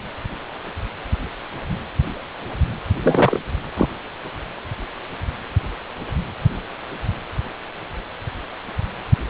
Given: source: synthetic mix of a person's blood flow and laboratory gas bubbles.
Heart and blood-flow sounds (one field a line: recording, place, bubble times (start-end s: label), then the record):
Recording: Doppler ultrasound of blood flow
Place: precordium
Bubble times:
3.03-3.38 s: bubbles
3.76-3.88 s: bubbles
From the record:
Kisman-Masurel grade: 223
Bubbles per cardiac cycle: several, 3 to 8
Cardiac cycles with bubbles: 10 to 50%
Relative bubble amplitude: loud (0.450 to 0.775)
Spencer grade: 2 (many but less than half of the cardiac periods contain bubble signals, singularly or in groups)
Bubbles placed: anywhere in the cardiac cycle